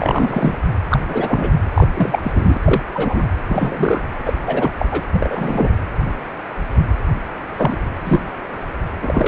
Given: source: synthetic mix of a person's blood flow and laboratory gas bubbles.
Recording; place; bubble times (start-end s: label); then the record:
Doppler ultrasound of blood flow; precordium
0.00-0.58 s: bubbles
0.90-0.99 s: bubbles
1.07-1.54 s: bubbles
1.74-1.87 s: bubbles
1.94-2.58 s: bubbles
2.64-2.82 s: bubbles
2.94-3.25 s: bubbles
3.49-4.04 s: bubbles
4.25-4.33 s: bubbles
4.46-4.71 s: bubbles
4.79-4.86 s: bubbles
4.91-5.04 s: bubbles
5.12-5.69 s: bubbles
7.57-7.77 s: bubbles
8.04-8.20 s: bubbles
9.02-9.28 s: bubbles
From the record:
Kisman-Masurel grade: 233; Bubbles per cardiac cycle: several, 3 to 8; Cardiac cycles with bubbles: 50 to 99%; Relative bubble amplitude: loud (0.450 to 0.775); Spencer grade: 3 (all of the cardiac periods contain showers or single bubble signals, but not dominating or overriding the cardiac motion signals); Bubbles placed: anywhere in the cardiac cycle